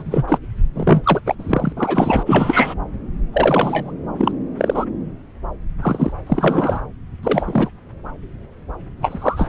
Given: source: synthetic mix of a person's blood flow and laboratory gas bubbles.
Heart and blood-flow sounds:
Doppler ultrasound of blood flow; subclavian vein
0.00-0.38 s: bubbles
0.75-1.21 s: bubbles
1.26-1.35 s: bubbles
1.39-1.73 s: bubbles
1.77-2.23 s: bubbles
2.25-2.75 s: bubbles
3.33-3.92 s: bubbles
4.17-4.32 s: bubbles
4.57-4.85 s: bubbles
5.82-6.12 s: bubbles
6.26-6.81 s: bubbles
7.23-7.69 s: bubbles
9.01-9.49 s: bubbles
From the record:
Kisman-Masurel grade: 233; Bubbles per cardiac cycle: several, 3 to 8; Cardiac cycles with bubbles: 50 to 99%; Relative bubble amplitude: loud (0.450 to 0.775); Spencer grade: 3 (all of the cardiac periods contain showers or single bubble signals, but not dominating or overriding the cardiac motion signals); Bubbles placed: anywhere in the cardiac cycle

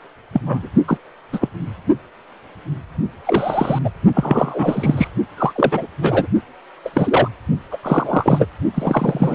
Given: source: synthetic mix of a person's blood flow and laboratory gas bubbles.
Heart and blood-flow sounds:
Doppler ultrasound of blood flow; precordium
0.32-0.41 s: bubbles
0.46-0.68 s: bubbles
0.87-0.97 s: bubbles
1.33-1.48 s: bubbles
3.27-3.79 s: bubbles
3.84-3.90 s: bubbles
4.14-5.08 s: bubbles
5.37-5.86 s: bubbles
6.01-6.27 s: bubbles
6.85-6.90 s: bubbles
6.93-7.28 s: bubbles
7.71-7.77 s: bubbles
7.83-8.46 s: bubbles
8.74-9.35 s: bubbles
From the record:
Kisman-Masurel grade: 243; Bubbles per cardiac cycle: several, 3 to 8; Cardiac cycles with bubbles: 100%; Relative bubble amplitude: loud (0.450 to 0.775); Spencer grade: 3 (all of the cardiac periods contain showers or single bubble signals, but not dominating or overriding the cardiac motion signals); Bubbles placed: only in the low amplitude regions of the cardiac cycle

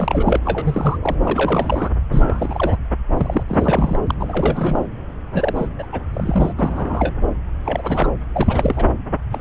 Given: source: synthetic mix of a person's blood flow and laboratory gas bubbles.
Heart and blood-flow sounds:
Doppler ultrasound of blood flow; subclavian vein
0.00-0.40 s: bubbles
0.45-0.98 s: bubbles
1.03-1.14 s: bubbles
1.22-1.89 s: bubbles
2.12-2.23 s: bubbles
2.27-2.79 s: bubbles
3.17-3.44 s: bubbles
3.48-3.98 s: bubbles
4.06-4.14 s: bubbles
4.19-4.85 s: bubbles
5.31-5.67 s: bubbles
5.78-5.86 s: bubbles
5.92-6.03 s: bubbles
6.13-6.53 s: bubbles
6.58-7.14 s: bubbles
7.64-8.11 s: bubbles
8.35-8.86 s: bubbles
9.31-9.41 s: bubbles
From the record:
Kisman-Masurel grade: 342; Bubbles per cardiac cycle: rolling drumbeat, 9 or more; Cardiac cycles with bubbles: 100%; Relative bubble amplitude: moderate (0.250 to 0.450); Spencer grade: 3 (all of the cardiac periods contain showers or single bubble signals, but not dominating or overriding the cardiac motion signals); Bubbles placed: anywhere in the cardiac cycle

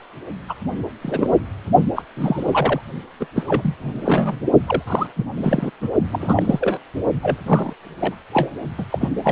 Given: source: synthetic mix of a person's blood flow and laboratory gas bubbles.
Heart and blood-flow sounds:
Doppler ultrasound of blood flow; precordium
0.49-0.54 s: bubbles
1.01-1.31 s: bubbles
1.96-2.02 s: bubbles
2.16-2.81 s: bubbles
3.19-3.27 s: bubbles
3.35-3.44 s: bubbles
3.46-3.75 s: bubbles
3.82-4.40 s: bubbles
4.66-4.83 s: bubbles
4.87-5.07 s: bubbles
5.16-5.25 s: bubbles
5.37-5.70 s: bubbles
5.82-5.90 s: bubbles
6.11-6.78 s: bubbles
7.21-7.38 s: bubbles
7.46-7.74 s: bubbles
8.00-8.15 s: bubbles
8.33-8.51 s: bubbles
8.78-8.86 s: bubbles
8.91-9.09 s: bubbles
9.24-9.32 s: bubbles
From the record:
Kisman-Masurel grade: 243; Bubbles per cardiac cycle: several, 3 to 8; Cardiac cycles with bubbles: 100%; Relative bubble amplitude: loud (0.450 to 0.775); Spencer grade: 3 (all of the cardiac periods contain showers or single bubble signals, but not dominating or overriding the cardiac motion signals); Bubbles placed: only in the low amplitude regions of the cardiac cycle

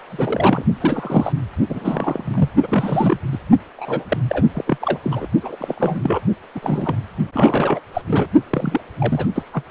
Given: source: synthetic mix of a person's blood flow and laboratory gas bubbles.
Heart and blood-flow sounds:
Doppler ultrasound of blood flow; precordium
0.10-0.65 s: bubbles
0.80-1.33 s: bubbles
1.69-2.49 s: bubbles
2.62-3.20 s: bubbles
3.31-3.38 s: bubbles
3.77-4.04 s: bubbles
4.08-4.17 s: bubbles
4.28-4.46 s: bubbles
4.53-4.78 s: bubbles
4.80-5.00 s: bubbles
5.04-5.28 s: bubbles
5.42-5.56 s: bubbles
5.59-6.21 s: bubbles
6.55-6.97 s: bubbles
7.32-7.80 s: bubbles
7.94-8.02 s: bubbles
8.07-8.27 s: bubbles
8.50-8.80 s: bubbles
8.99-9.27 s: bubbles
9.35-9.44 s: bubbles
9.53-9.62 s: bubbles
From the record:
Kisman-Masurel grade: 342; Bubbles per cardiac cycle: rolling drumbeat, 9 or more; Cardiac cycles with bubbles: 100%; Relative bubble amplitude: moderate (0.250 to 0.450); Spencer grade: 3 (all of the cardiac periods contain showers or single bubble signals, but not dominating or overriding the cardiac motion signals); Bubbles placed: only in the low amplitude regions of the cardiac cycle

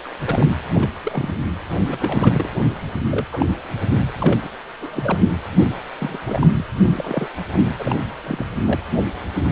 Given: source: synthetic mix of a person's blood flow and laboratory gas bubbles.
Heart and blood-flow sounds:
Doppler ultrasound of blood flow; precordium
0.04-0.09 s: bubbles
0.24-0.46 s: bubbles
0.73-1.37 s: bubbles
1.86-2.50 s: bubbles
3.10-3.25 s: bubbles
3.32-3.46 s: bubbles
4.21-4.38 s: bubbles
4.42-4.50 s: bubbles
4.80-5.18 s: bubbles
5.98-6.19 s: bubbles
6.26-6.48 s: bubbles
6.54-6.65 s: bubbles
6.83-7.27 s: bubbles
7.52-7.60 s: bubbles
7.79-7.96 s: bubbles
8.24-8.45 s: bubbles
8.66-8.83 s: bubbles
From the record:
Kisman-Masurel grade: 232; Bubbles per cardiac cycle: several, 3 to 8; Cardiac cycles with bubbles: 50 to 99%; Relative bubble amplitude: moderate (0.250 to 0.450); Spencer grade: 3 (all of the cardiac periods contain showers or single bubble signals, but not dominating or overriding the cardiac motion signals); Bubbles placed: anywhere in the cardiac cycle

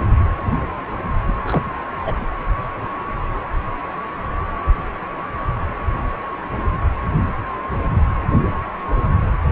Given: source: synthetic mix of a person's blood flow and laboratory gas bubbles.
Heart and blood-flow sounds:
Doppler ultrasound of blood flow; precordium
1.43-1.71 s: bubbles
2.05-2.15 s: bubbles
From the record:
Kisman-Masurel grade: 212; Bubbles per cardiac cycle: several, 3 to 8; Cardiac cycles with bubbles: 1 to 10%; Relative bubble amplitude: moderate (0.250 to 0.450); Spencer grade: 1 (occasional bubble signal discernible with the cardiac motion signal, with majority of cardiac periods free of bubbles); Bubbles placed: only in the low amplitude regions of the cardiac cycle

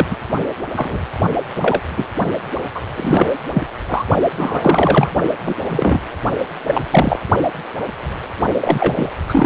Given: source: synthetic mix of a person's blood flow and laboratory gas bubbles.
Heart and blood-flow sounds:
Doppler ultrasound of blood flow; precordium
0.00-0.06 s: bubbles
0.10-0.17 s: bubbles
0.76-1.00 s: bubbles
1.56-1.81 s: bubbles
1.96-2.08 s: bubbles
2.74-2.81 s: bubbles
2.96-3.27 s: bubbles
3.53-3.63 s: bubbles
3.88-4.05 s: bubbles
4.37-5.10 s: bubbles
5.46-5.55 s: bubbles
5.69-6.00 s: bubbles
6.66-6.87 s: bubbles
6.90-7.19 s: bubbles
8.61-9.11 s: bubbles
9.29-9.46 s: bubbles
From the record:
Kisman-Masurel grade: 233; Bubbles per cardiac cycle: several, 3 to 8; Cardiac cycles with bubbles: 50 to 99%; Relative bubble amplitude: loud (0.450 to 0.775); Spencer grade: 3 (all of the cardiac periods contain showers or single bubble signals, but not dominating or overriding the cardiac motion signals); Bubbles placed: only in the low amplitude regions of the cardiac cycle

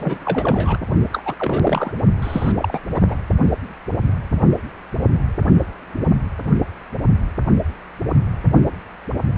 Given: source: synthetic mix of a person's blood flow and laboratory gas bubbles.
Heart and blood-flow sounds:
Doppler ultrasound of blood flow; precordium
0.00-0.78 s: bubbles
1.12-1.22 s: bubbles
1.25-1.34 s: bubbles
1.39-1.91 s: bubbles
2.22-2.53 s: bubbles
2.57-2.80 s: bubbles
2.89-3.16 s: bubbles
From the record:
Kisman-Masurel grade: 332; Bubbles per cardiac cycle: rolling drumbeat, 9 or more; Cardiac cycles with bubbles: 50 to 99%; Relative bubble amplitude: moderate (0.250 to 0.450); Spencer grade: 3 (all of the cardiac periods contain showers or single bubble signals, but not dominating or overriding the cardiac motion signals); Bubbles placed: only in the low amplitude regions of the cardiac cycle

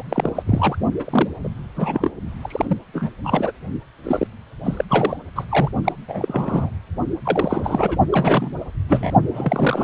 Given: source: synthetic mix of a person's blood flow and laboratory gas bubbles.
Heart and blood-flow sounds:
Doppler ultrasound of blood flow; precordium
0.00-0.02 s: bubbles
0.09-0.32 s: bubbles
0.35-0.42 s: bubbles
0.46-0.78 s: bubbles
0.99-1.03 s: bubbles
1.06-1.29 s: bubbles
1.43-1.49 s: bubbles
1.76-2.12 s: bubbles
2.42-2.77 s: bubbles
2.94-3.10 s: bubbles
3.24-3.52 s: bubbles
4.03-4.27 s: bubbles
4.64-4.84 s: bubbles
4.89-5.17 s: bubbles
5.36-5.45 s: bubbles
5.49-5.71 s: bubbles
5.84-5.92 s: bubbles
6.08-6.70 s: bubbles
7.24-7.97 s: bubbles
8.12-8.54 s: bubbles
8.88-9.13 s: bubbles
9.33-9.84 s: bubbles
From the record:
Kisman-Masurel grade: 342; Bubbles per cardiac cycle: rolling drumbeat, 9 or more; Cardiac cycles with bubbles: 100%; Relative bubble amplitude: moderate (0.250 to 0.450); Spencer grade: 3 (all of the cardiac periods contain showers or single bubble signals, but not dominating or overriding the cardiac motion signals); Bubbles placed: only in the low amplitude regions of the cardiac cycle

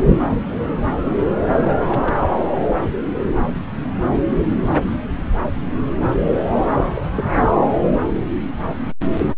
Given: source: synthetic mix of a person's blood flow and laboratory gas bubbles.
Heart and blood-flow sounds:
Doppler ultrasound of blood flow; subclavian vein
1.54-2.17 s: bubbles
6.84-7.05 s: bubbles
7.16-7.58 s: bubbles
From the record:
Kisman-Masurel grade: 211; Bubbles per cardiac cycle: several, 3 to 8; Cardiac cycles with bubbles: 1 to 10%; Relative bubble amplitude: barely perceptible (0.100 to 0.250); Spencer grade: 1 (occasional bubble signal discernible with the cardiac motion signal, with majority of cardiac periods free of bubbles); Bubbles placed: anywhere in the cardiac cycle

